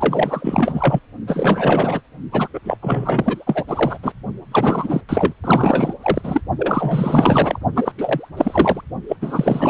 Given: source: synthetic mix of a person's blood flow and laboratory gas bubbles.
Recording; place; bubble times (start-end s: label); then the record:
Doppler ultrasound of blood flow; precordium
0.00-0.99 s: bubbles
1.27-2.01 s: bubbles
2.31-2.49 s: bubbles
2.54-2.60 s: bubbles
2.64-2.77 s: bubbles
2.81-3.64 s: bubbles
3.68-3.98 s: bubbles
4.02-4.12 s: bubbles
4.51-5.01 s: bubbles
5.08-5.33 s: bubbles
5.43-5.93 s: bubbles
6.02-6.41 s: bubbles
6.58-7.58 s: bubbles
7.75-7.92 s: bubbles
7.97-8.29 s: bubbles
8.37-8.81 s: bubbles
9.08-9.16 s: bubbles
9.21-9.69 s: bubbles
From the record:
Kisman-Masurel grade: 444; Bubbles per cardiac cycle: continuous sound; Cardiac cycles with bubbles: 100%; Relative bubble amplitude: maximal (0.775 to 0.999); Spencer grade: 4 (maximum detectable bubble signal sounding continuously throughout systole and diastole of every cardiac period, and overriding the amplitude of the normal cardiac signals); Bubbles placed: only in the low amplitude regions of the cardiac cycle